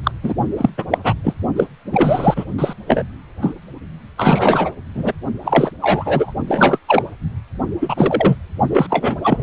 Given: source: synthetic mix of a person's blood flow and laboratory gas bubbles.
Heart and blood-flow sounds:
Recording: Doppler ultrasound of blood flow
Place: precordium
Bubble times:
0.03-0.11 s: bubbles
0.23-0.34 s: bubbles
0.57-0.69 s: bubbles
0.78-0.85 s: bubbles
0.91-0.98 s: bubbles
1.04-1.13 s: bubbles
1.23-1.33 s: bubbles
1.56-1.67 s: bubbles
1.92-2.44 s: bubbles
2.58-2.73 s: bubbles
2.87-3.03 s: bubbles
3.42-3.53 s: bubbles
4.17-4.72 s: bubbles
4.95-5.12 s: bubbles
5.44-5.71 s: bubbles
5.80-6.33 s: bubbles
6.47-6.79 s: bubbles
6.88-7.04 s: bubbles
7.81-8.39 s: bubbles
8.70-8.87 s: bubbles
8.89-9.15 s: bubbles
9.23-9.43 s: bubbles
From the record:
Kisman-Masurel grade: 243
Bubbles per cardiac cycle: several, 3 to 8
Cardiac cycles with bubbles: 100%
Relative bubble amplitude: loud (0.450 to 0.775)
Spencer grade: 3 (all of the cardiac periods contain showers or single bubble signals, but not dominating or overriding the cardiac motion signals)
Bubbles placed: only in the low amplitude regions of the cardiac cycle

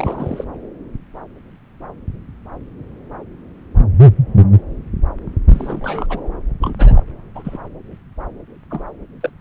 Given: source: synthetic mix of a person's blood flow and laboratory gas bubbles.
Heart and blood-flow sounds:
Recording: Doppler ultrasound of blood flow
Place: subclavian vein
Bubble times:
0.00-0.45 s: bubbles
5.49-6.06 s: bubbles
6.09-6.21 s: bubbles
6.61-7.02 s: bubbles
7.35-7.57 s: bubbles
8.71-8.81 s: bubbles
9.21-9.30 s: bubbles
From the record:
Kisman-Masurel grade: 222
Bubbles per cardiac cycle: several, 3 to 8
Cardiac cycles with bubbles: 10 to 50%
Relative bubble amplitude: moderate (0.250 to 0.450)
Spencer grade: 2 (many but less than half of the cardiac periods contain bubble signals, singularly or in groups)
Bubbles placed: anywhere in the cardiac cycle

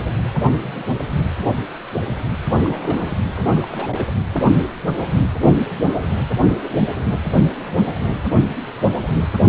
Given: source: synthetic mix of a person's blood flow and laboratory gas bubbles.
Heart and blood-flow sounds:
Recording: Doppler ultrasound of blood flow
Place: precordium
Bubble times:
0.43-0.85 s: bubbles
0.98-1.04 s: bubbles
2.62-3.16 s: bubbles
3.35-4.04 s: bubbles
From the record:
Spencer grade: 2 (many but less than half of the cardiac periods contain bubble signals, singularly or in groups)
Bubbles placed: anywhere in the cardiac cycle

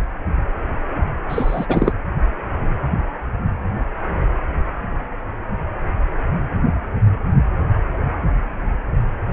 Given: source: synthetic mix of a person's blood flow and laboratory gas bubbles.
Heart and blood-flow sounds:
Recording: Doppler ultrasound of blood flow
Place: precordium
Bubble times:
1.29-1.66 s: bubbles
1.68-1.93 s: bubbles
From the record:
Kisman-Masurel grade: 213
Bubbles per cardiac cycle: several, 3 to 8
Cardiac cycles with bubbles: 1 to 10%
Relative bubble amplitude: loud (0.450 to 0.775)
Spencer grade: 1 (occasional bubble signal discernible with the cardiac motion signal, with majority of cardiac periods free of bubbles)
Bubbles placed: anywhere in the cardiac cycle

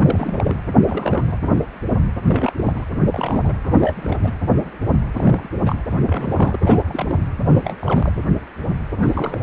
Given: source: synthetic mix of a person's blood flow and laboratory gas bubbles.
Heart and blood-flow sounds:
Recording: Doppler ultrasound of blood flow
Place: precordium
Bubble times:
0.00-0.55 s: bubbles
0.73-1.36 s: bubbles
2.25-2.52 s: bubbles
2.56-2.85 s: bubbles
2.92-2.97 s: bubbles
3.00-3.53 s: bubbles
3.64-4.32 s: bubbles
5.17-5.49 s: bubbles
5.65-5.78 s: bubbles
5.90-5.95 s: bubbles
6.05-6.59 s: bubbles
6.61-7.19 s: bubbles
7.49-7.75 s: bubbles
7.81-8.12 s: bubbles
8.93-9.36 s: bubbles
From the record:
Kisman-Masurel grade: 332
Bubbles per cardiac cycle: rolling drumbeat, 9 or more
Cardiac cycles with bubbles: 50 to 99%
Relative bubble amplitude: moderate (0.250 to 0.450)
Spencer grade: 3 (all of the cardiac periods contain showers or single bubble signals, but not dominating or overriding the cardiac motion signals)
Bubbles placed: anywhere in the cardiac cycle

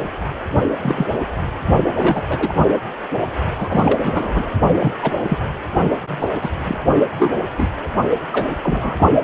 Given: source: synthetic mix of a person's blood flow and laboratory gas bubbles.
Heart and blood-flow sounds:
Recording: Doppler ultrasound of blood flow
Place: precordium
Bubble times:
0.81-1.06 s: bubbles
1.96-2.23 s: bubbles
2.28-2.53 s: bubbles
3.58-4.00 s: bubbles
4.04-4.52 s: bubbles
4.79-4.94 s: bubbles
5.03-5.13 s: bubbles
5.28-5.38 s: bubbles
6.19-6.28 s: bubbles
6.42-6.49 s: bubbles
6.65-6.79 s: bubbles
7.20-7.33 s: bubbles
7.58-7.69 s: bubbles
8.32-8.47 s: bubbles
8.62-9.07 s: bubbles
From the record:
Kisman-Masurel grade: 242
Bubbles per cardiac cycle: several, 3 to 8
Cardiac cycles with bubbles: 100%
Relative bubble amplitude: moderate (0.250 to 0.450)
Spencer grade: 3 (all of the cardiac periods contain showers or single bubble signals, but not dominating or overriding the cardiac motion signals)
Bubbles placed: only in the low amplitude regions of the cardiac cycle

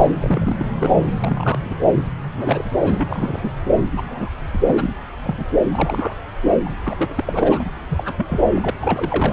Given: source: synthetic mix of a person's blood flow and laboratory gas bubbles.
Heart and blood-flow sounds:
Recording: Doppler ultrasound of blood flow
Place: subclavian vein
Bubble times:
0.00-0.14 s: bubbles
0.21-0.56 s: bubbles
0.58-0.72 s: bubbles
0.79-0.93 s: bubbles
1.14-1.59 s: bubbles
1.63-1.76 s: bubbles
1.94-2.07 s: bubbles
2.37-2.70 s: bubbles
2.82-3.51 s: bubbles
3.96-4.31 s: bubbles
4.53-4.58 s: bubbles
4.66-4.91 s: bubbles
5.23-5.46 s: bubbles
5.71-6.15 s: bubbles
6.45-6.52 s: bubbles
6.65-6.71 s: bubbles
6.85-7.10 s: bubbles
7.15-7.65 s: bubbles
7.90-8.14 s: bubbles
8.17-8.42 s: bubbles
8.54-8.71 s: bubbles
8.81-9.33 s: bubbles
From the record:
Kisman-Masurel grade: 242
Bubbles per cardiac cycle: several, 3 to 8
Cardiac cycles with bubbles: 100%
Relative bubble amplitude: moderate (0.250 to 0.450)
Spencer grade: 3 (all of the cardiac periods contain showers or single bubble signals, but not dominating or overriding the cardiac motion signals)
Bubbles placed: anywhere in the cardiac cycle

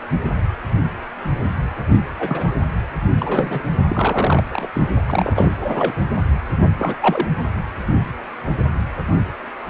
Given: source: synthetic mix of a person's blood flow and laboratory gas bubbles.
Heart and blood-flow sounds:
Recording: Doppler ultrasound of blood flow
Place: precordium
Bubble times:
2.19-2.56 s: bubbles
3.19-3.62 s: bubbles
3.90-4.42 s: bubbles
4.50-4.67 s: bubbles
4.75-4.89 s: bubbles
5.08-5.50 s: bubbles
5.60-5.95 s: bubbles
6.78-6.95 s: bubbles
7.00-7.28 s: bubbles
From the record:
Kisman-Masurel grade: 222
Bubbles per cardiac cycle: several, 3 to 8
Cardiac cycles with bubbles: 10 to 50%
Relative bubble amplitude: moderate (0.250 to 0.450)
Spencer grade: 2 (many but less than half of the cardiac periods contain bubble signals, singularly or in groups)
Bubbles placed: anywhere in the cardiac cycle

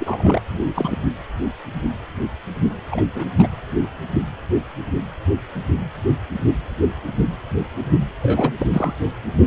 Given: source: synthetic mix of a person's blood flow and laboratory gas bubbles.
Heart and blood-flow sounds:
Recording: Doppler ultrasound of blood flow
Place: precordium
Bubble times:
0.00-0.41 s: bubbles
0.51-0.66 s: bubbles
0.74-0.96 s: bubbles
2.91-3.02 s: bubbles
3.15-3.24 s: bubbles
3.38-3.47 s: bubbles
8.22-8.54 s: bubbles
8.58-8.67 s: bubbles
8.73-8.94 s: bubbles
From the record:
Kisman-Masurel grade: 222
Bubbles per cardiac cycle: several, 3 to 8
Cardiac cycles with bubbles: 10 to 50%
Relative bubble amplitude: moderate (0.250 to 0.450)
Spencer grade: 2 (many but less than half of the cardiac periods contain bubble signals, singularly or in groups)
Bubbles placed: anywhere in the cardiac cycle

